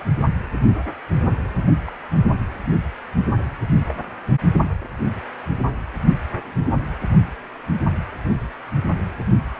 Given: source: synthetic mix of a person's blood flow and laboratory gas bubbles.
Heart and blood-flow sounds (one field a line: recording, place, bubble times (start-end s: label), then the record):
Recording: Doppler ultrasound of blood flow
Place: precordium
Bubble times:
1.87-1.92 s: bubbles
3.88-4.04 s: bubbles
From the record:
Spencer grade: 2 (many but less than half of the cardiac periods contain bubble signals, singularly or in groups)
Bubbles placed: only in the low amplitude regions of the cardiac cycle